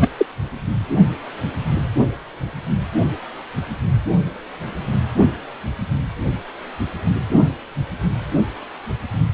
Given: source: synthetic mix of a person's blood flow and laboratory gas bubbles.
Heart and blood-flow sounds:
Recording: Doppler ultrasound of blood flow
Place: precordium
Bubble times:
0.01-0.09 s: bubbles
0.18-0.26 s: bubbles
From the record:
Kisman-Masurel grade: 213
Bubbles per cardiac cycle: several, 3 to 8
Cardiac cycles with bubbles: 1 to 10%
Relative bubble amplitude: loud (0.450 to 0.775)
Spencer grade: 1 (occasional bubble signal discernible with the cardiac motion signal, with majority of cardiac periods free of bubbles)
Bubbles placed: only in the low amplitude regions of the cardiac cycle

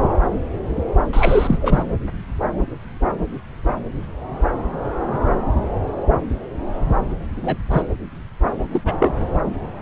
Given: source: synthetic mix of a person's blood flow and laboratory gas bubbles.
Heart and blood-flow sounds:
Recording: Doppler ultrasound of blood flow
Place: subclavian vein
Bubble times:
1.13-1.82 s: bubbles
7.37-7.58 s: bubbles
7.71-7.83 s: bubbles
8.72-8.92 s: bubbles
8.99-9.12 s: bubbles
From the record:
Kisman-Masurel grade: 223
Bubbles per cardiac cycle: several, 3 to 8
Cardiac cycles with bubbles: 10 to 50%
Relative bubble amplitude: loud (0.450 to 0.775)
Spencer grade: 2 (many but less than half of the cardiac periods contain bubble signals, singularly or in groups)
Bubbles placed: anywhere in the cardiac cycle

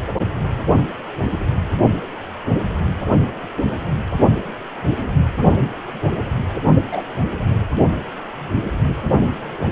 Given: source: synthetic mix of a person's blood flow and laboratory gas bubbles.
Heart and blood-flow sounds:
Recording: Doppler ultrasound of blood flow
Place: precordium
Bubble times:
6.91-7.03 s: bubbles
From the record:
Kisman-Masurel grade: 113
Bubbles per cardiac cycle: 1 to 2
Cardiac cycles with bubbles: 1 to 10%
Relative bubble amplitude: loud (0.450 to 0.775)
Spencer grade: 1 (occasional bubble signal discernible with the cardiac motion signal, with majority of cardiac periods free of bubbles)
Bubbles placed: only in the low amplitude regions of the cardiac cycle

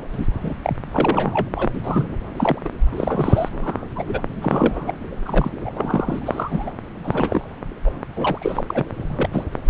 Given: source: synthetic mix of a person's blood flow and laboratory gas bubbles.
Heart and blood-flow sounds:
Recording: Doppler ultrasound of blood flow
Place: subclavian vein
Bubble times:
0.12-0.27 s: bubbles
0.43-0.54 s: bubbles
0.64-0.73 s: bubbles
0.91-1.50 s: bubbles
1.54-1.71 s: bubbles
1.73-2.04 s: bubbles
2.37-2.70 s: bubbles
2.96-3.49 s: bubbles
3.62-3.85 s: bubbles
3.96-4.21 s: bubbles
4.38-4.92 s: bubbles
5.25-5.50 s: bubbles
5.65-5.70 s: bubbles
5.75-6.20 s: bubbles
6.25-6.71 s: bubbles
7.04-7.47 s: bubbles
7.85-7.91 s: bubbles
8.16-8.38 s: bubbles
8.41-8.64 s: bubbles
8.67-8.85 s: bubbles
9.12-9.28 s: bubbles
9.32-9.44 s: bubbles
From the record:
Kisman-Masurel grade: 242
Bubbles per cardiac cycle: several, 3 to 8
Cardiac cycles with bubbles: 100%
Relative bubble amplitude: moderate (0.250 to 0.450)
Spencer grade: 3 (all of the cardiac periods contain showers or single bubble signals, but not dominating or overriding the cardiac motion signals)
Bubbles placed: anywhere in the cardiac cycle

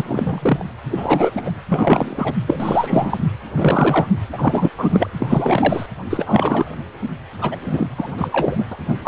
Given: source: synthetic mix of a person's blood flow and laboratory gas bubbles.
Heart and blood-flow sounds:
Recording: Doppler ultrasound of blood flow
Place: precordium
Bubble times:
0.00-0.67 s: bubbles
0.91-1.31 s: bubbles
1.34-1.51 s: bubbles
1.68-2.35 s: bubbles
2.46-3.17 s: bubbles
3.56-4.06 s: bubbles
4.32-4.70 s: bubbles
4.78-5.08 s: bubbles
5.19-5.86 s: bubbles
6.10-6.75 s: bubbles
7.41-7.57 s: bubbles
7.63-7.87 s: bubbles
7.97-8.28 s: bubbles
8.31-8.63 s: bubbles
8.71-8.81 s: bubbles
8.88-8.97 s: bubbles
9.04-9.07 s: bubbles
From the record:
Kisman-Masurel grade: 343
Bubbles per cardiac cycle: rolling drumbeat, 9 or more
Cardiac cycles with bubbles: 100%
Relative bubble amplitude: loud (0.450 to 0.775)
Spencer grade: 3 (all of the cardiac periods contain showers or single bubble signals, but not dominating or overriding the cardiac motion signals)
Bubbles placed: anywhere in the cardiac cycle

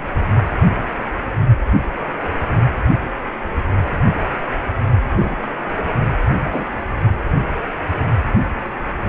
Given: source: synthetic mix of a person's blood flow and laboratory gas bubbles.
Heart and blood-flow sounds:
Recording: Doppler ultrasound of blood flow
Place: precordium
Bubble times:
5.13-5.38 s: bubbles
5.67-5.74 s: bubbles
6.39-6.66 s: bubbles
From the record:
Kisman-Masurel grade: 221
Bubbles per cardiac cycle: several, 3 to 8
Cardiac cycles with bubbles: 10 to 50%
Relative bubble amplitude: barely perceptible (0.100 to 0.250)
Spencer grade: 2 (many but less than half of the cardiac periods contain bubble signals, singularly or in groups)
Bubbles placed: only in the low amplitude regions of the cardiac cycle

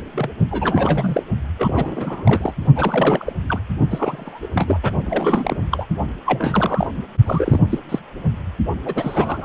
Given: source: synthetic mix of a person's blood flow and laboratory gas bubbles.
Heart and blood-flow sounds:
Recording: Doppler ultrasound of blood flow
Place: precordium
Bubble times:
0.03-0.31 s: bubbles
0.50-1.23 s: bubbles
1.58-2.54 s: bubbles
2.75-3.32 s: bubbles
3.49-3.59 s: bubbles
3.90-4.48 s: bubbles
4.55-4.80 s: bubbles
4.83-4.92 s: bubbles
5.06-5.57 s: bubbles
5.71-5.86 s: bubbles
6.26-6.87 s: bubbles
6.97-7.03 s: bubbles
7.26-7.60 s: bubbles
7.70-7.79 s: bubbles
7.89-8.00 s: bubbles
8.85-9.45 s: bubbles
From the record:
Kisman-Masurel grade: 332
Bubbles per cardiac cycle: rolling drumbeat, 9 or more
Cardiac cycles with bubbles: 50 to 99%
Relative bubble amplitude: moderate (0.250 to 0.450)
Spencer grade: 3 (all of the cardiac periods contain showers or single bubble signals, but not dominating or overriding the cardiac motion signals)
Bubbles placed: only in the low amplitude regions of the cardiac cycle

